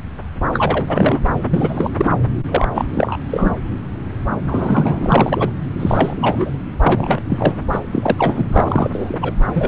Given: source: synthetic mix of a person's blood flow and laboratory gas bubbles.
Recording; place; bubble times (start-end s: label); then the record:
Doppler ultrasound of blood flow; subclavian vein
0.53-1.20 s: bubbles
1.53-1.91 s: bubbles
1.98-2.10 s: bubbles
2.49-2.68 s: bubbles
2.75-2.85 s: bubbles
2.94-3.17 s: bubbles
3.30-3.53 s: bubbles
4.46-5.50 s: bubbles
5.79-6.58 s: bubbles
6.82-7.20 s: bubbles
7.29-7.58 s: bubbles
7.71-7.79 s: bubbles
7.92-8.47 s: bubbles
8.53-9.18 s: bubbles
9.21-9.34 s: bubbles
9.54-9.68 s: bubbles
From the record:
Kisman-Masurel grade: 333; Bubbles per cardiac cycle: rolling drumbeat, 9 or more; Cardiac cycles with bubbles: 50 to 99%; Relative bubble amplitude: loud (0.450 to 0.775); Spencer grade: 3 (all of the cardiac periods contain showers or single bubble signals, but not dominating or overriding the cardiac motion signals); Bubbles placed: anywhere in the cardiac cycle